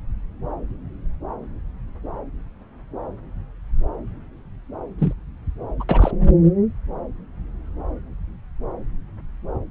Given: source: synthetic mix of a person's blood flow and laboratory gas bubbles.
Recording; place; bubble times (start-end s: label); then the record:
Doppler ultrasound of blood flow; subclavian vein
4.98-5.13 s: bubbles
5.79-5.84 s: bubbles
5.89-6.11 s: bubbles
From the record:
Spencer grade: 1 (occasional bubble signal discernible with the cardiac motion signal, with majority of cardiac periods free of bubbles); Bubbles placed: anywhere in the cardiac cycle